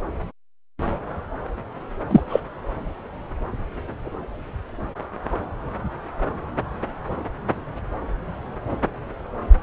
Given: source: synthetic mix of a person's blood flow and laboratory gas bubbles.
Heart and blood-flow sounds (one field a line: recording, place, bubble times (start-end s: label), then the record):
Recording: Doppler ultrasound of blood flow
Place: subclavian vein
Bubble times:
2.10-2.21 s: bubbles
2.29-2.40 s: bubbles
From the record:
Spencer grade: 1 (occasional bubble signal discernible with the cardiac motion signal, with majority of cardiac periods free of bubbles)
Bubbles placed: anywhere in the cardiac cycle